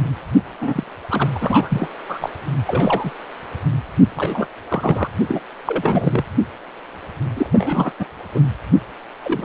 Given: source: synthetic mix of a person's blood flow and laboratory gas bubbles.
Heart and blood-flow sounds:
Doppler ultrasound of blood flow; precordium
0.61-0.84 s: bubbles
1.10-1.28 s: bubbles
1.35-1.38 s: bubbles
1.41-1.90 s: bubbles
2.08-2.29 s: bubbles
2.67-3.10 s: bubbles
4.16-4.47 s: bubbles
4.70-5.08 s: bubbles
5.28-5.42 s: bubbles
5.65-6.25 s: bubbles
7.36-7.50 s: bubbles
7.53-7.92 s: bubbles
7.99-8.05 s: bubbles
8.33-8.40 s: bubbles
9.22-9.45 s: bubbles
From the record:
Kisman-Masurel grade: 242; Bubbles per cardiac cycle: several, 3 to 8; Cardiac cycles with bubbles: 100%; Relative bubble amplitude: moderate (0.250 to 0.450); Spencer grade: 3 (all of the cardiac periods contain showers or single bubble signals, but not dominating or overriding the cardiac motion signals); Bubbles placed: anywhere in the cardiac cycle

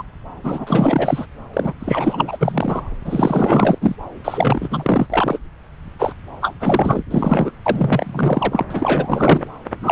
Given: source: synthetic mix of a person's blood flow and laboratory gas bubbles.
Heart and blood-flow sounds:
Doppler ultrasound of blood flow; subclavian vein
0.00-0.02 s: bubbles
0.43-1.26 s: bubbles
1.53-1.73 s: bubbles
1.80-2.82 s: bubbles
3.05-3.96 s: bubbles
4.24-5.07 s: bubbles
5.10-5.39 s: bubbles
5.99-6.12 s: bubbles
6.41-6.54 s: bubbles
6.60-7.04 s: bubbles
7.11-7.51 s: bubbles
7.66-8.65 s: bubbles
8.70-9.47 s: bubbles
9.81-9.92 s: bubbles
From the record:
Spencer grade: 4 (maximum detectable bubble signal sounding continuously throughout systole and diastole of every cardiac period, and overriding the amplitude of the normal cardiac signals); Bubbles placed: anywhere in the cardiac cycle

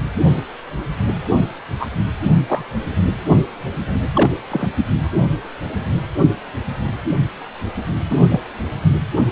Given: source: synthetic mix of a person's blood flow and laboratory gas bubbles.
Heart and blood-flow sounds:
Doppler ultrasound of blood flow; precordium
1.79-1.87 s: bubbles
2.48-2.64 s: bubbles
4.15-4.36 s: bubbles
4.51-4.68 s: bubbles
8.10-8.16 s: bubbles
8.29-8.40 s: bubbles
From the record:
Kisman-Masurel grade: 123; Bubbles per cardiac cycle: 1 to 2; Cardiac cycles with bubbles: 10 to 50%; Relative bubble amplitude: loud (0.450 to 0.775); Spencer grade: 2 (many but less than half of the cardiac periods contain bubble signals, singularly or in groups); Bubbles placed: anywhere in the cardiac cycle

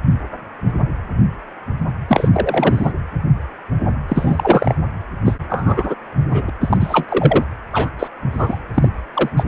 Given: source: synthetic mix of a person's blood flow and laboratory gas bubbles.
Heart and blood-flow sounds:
Doppler ultrasound of blood flow; precordium
2.08-2.28 s: bubbles
2.32-2.92 s: bubbles
4.08-4.75 s: bubbles
5.25-5.37 s: bubbles
5.49-5.95 s: bubbles
6.20-6.50 s: bubbles
6.61-7.06 s: bubbles
7.08-7.44 s: bubbles
7.72-7.89 s: bubbles
7.99-8.08 s: bubbles
8.33-8.59 s: bubbles
8.75-8.88 s: bubbles
9.13-9.29 s: bubbles
9.37-9.46 s: bubbles
From the record:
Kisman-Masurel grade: 223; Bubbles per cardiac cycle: several, 3 to 8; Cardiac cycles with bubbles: 10 to 50%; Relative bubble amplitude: loud (0.450 to 0.775); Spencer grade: 2 (many but less than half of the cardiac periods contain bubble signals, singularly or in groups); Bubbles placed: anywhere in the cardiac cycle

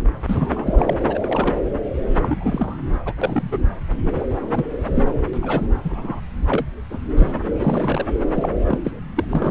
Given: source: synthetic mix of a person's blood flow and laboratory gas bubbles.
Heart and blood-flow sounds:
Doppler ultrasound of blood flow; subclavian vein
0.27-0.97 s: bubbles
1.08-1.57 s: bubbles
2.17-2.78 s: bubbles
3.05-3.13 s: bubbles
3.21-3.58 s: bubbles
4.14-4.25 s: bubbles
4.31-4.41 s: bubbles
4.53-4.65 s: bubbles
4.94-5.12 s: bubbles
5.33-5.38 s: bubbles
5.42-5.67 s: bubbles
5.83-6.21 s: bubbles
6.48-6.65 s: bubbles
6.90-7.00 s: bubbles
7.16-7.33 s: bubbles
7.59-8.06 s: bubbles
8.34-8.49 s: bubbles
8.63-8.79 s: bubbles
8.84-8.91 s: bubbles
9.16-9.24 s: bubbles
9.29-9.51 s: bubbles
From the record:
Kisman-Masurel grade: 242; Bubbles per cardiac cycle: several, 3 to 8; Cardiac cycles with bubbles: 100%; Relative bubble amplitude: moderate (0.250 to 0.450); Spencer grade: 3 (all of the cardiac periods contain showers or single bubble signals, but not dominating or overriding the cardiac motion signals); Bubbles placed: anywhere in the cardiac cycle

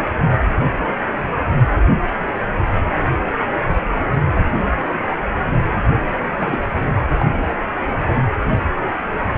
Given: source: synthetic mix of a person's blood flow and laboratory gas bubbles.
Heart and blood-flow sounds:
Doppler ultrasound of blood flow; precordium
6.30-6.57 s: bubbles
7.20-7.25 s: bubbles
From the record:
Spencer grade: 2 (many but less than half of the cardiac periods contain bubble signals, singularly or in groups); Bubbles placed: anywhere in the cardiac cycle

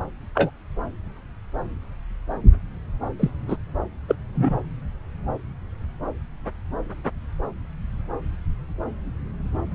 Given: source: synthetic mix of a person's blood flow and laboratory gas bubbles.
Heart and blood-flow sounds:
Doppler ultrasound of blood flow; subclavian vein
0.35-0.50 s: bubbles
3.19-3.30 s: bubbles
3.48-3.56 s: bubbles
4.08-4.16 s: bubbles
4.35-4.62 s: bubbles
From the record:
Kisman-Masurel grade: 122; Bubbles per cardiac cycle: 1 to 2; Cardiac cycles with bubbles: 10 to 50%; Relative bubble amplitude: moderate (0.250 to 0.450); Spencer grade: 2 (many but less than half of the cardiac periods contain bubble signals, singularly or in groups); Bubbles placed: anywhere in the cardiac cycle

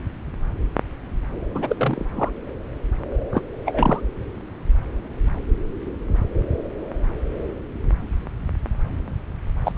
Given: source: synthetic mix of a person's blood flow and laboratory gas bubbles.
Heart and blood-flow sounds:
Doppler ultrasound of blood flow; subclavian vein
1.54-2.04 s: bubbles
2.15-2.30 s: bubbles
3.32-3.42 s: bubbles
3.65-4.01 s: bubbles
9.64-9.72 s: bubbles
9.74-9.78 s: bubbles
From the record:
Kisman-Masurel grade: 222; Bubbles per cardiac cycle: several, 3 to 8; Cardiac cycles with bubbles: 10 to 50%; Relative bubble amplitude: moderate (0.250 to 0.450); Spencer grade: 2 (many but less than half of the cardiac periods contain bubble signals, singularly or in groups); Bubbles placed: anywhere in the cardiac cycle

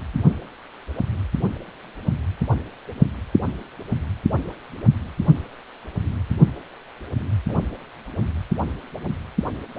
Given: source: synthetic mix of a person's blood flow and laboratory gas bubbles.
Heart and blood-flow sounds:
Doppler ultrasound of blood flow; precordium
7.49-7.54 s: bubbles
From the record:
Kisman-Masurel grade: 111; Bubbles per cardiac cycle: 1 to 2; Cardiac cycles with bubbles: 1 to 10%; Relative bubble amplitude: barely perceptible (0.100 to 0.250); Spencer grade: 1 (occasional bubble signal discernible with the cardiac motion signal, with majority of cardiac periods free of bubbles); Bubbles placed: anywhere in the cardiac cycle

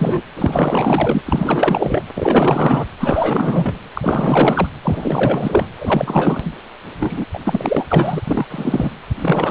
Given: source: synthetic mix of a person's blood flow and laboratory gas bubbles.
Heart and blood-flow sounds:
Doppler ultrasound of blood flow; precordium
0.00-0.22 s: bubbles
0.36-1.23 s: bubbles
1.26-2.03 s: bubbles
2.14-2.86 s: bubbles
3.00-3.79 s: bubbles
3.93-4.69 s: bubbles
4.82-5.68 s: bubbles
5.78-6.52 s: bubbles
7.00-7.25 s: bubbles
7.33-7.39 s: bubbles
7.43-7.85 s: bubbles
7.88-8.22 s: bubbles
8.27-8.46 s: bubbles
8.49-8.91 s: bubbles
9.19-9.51 s: bubbles
From the record:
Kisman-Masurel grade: 444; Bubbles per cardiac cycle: continuous sound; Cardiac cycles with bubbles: 100%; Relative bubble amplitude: maximal (0.775 to 0.999); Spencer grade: 4 (maximum detectable bubble signal sounding continuously throughout systole and diastole of every cardiac period, and overriding the amplitude of the normal cardiac signals); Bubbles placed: anywhere in the cardiac cycle

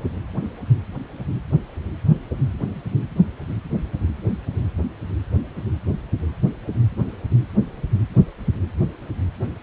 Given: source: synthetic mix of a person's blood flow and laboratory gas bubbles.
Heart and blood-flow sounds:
Doppler ultrasound of blood flow; precordium
no bubbles
From the record:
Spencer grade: 0 (complete lack of bubble signals)

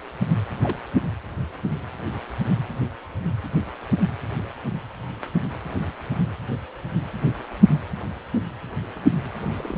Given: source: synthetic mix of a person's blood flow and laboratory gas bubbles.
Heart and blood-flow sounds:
Doppler ultrasound of blood flow; precordium
0.62-0.76 s: bubbles
9.57-9.78 s: bubbles
From the record:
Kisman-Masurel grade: 121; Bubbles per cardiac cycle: 1 to 2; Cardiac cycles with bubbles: 10 to 50%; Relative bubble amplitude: barely perceptible (0.100 to 0.250); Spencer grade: 2 (many but less than half of the cardiac periods contain bubble signals, singularly or in groups); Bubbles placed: anywhere in the cardiac cycle

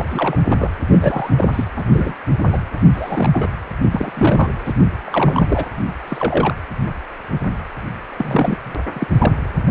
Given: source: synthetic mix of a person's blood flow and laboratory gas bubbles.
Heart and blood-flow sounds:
Doppler ultrasound of blood flow; precordium
0.00-0.05 s: bubbles
0.10-0.38 s: bubbles
0.49-0.70 s: bubbles
0.89-1.65 s: bubbles
1.76-1.84 s: bubbles
1.93-2.14 s: bubbles
2.39-2.60 s: bubbles
2.94-3.49 s: bubbles
3.82-3.89 s: bubbles
3.92-4.11 s: bubbles
4.14-4.50 s: bubbles
4.65-4.72 s: bubbles
5.04-5.66 s: bubbles
6.08-6.54 s: bubbles
8.17-8.76 s: bubbles
8.93-9.08 s: bubbles
9.18-9.33 s: bubbles
From the record:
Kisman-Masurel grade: 232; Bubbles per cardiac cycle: several, 3 to 8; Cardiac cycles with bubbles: 50 to 99%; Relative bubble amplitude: moderate (0.250 to 0.450); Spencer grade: 3 (all of the cardiac periods contain showers or single bubble signals, but not dominating or overriding the cardiac motion signals); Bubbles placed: anywhere in the cardiac cycle

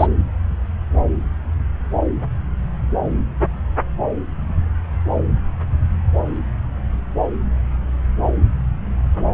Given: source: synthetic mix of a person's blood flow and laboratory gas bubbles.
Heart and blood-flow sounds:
Doppler ultrasound of blood flow; subclavian vein
0.00-0.07 s: bubbles
From the record:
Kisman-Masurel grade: 213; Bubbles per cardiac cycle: several, 3 to 8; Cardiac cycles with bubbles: 1 to 10%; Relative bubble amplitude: loud (0.450 to 0.775); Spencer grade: 1 (occasional bubble signal discernible with the cardiac motion signal, with majority of cardiac periods free of bubbles); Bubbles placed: anywhere in the cardiac cycle

